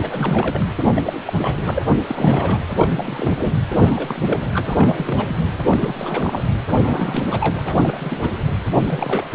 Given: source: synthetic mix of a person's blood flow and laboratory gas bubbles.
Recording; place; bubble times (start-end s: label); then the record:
Doppler ultrasound of blood flow; precordium
0.00-0.66 s: bubbles
0.95-1.02 s: bubbles
1.06-1.21 s: bubbles
1.24-1.33 s: bubbles
1.38-1.83 s: bubbles
2.08-2.58 s: bubbles
2.77-3.55 s: bubbles
3.75-4.62 s: bubbles
4.65-5.36 s: bubbles
5.70-6.44 s: bubbles
6.82-7.76 s: bubbles
7.81-8.30 s: bubbles
8.78-9.29 s: bubbles
From the record:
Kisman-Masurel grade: 342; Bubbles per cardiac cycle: rolling drumbeat, 9 or more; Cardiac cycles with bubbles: 100%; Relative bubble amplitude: moderate (0.250 to 0.450); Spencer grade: 3 (all of the cardiac periods contain showers or single bubble signals, but not dominating or overriding the cardiac motion signals); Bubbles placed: anywhere in the cardiac cycle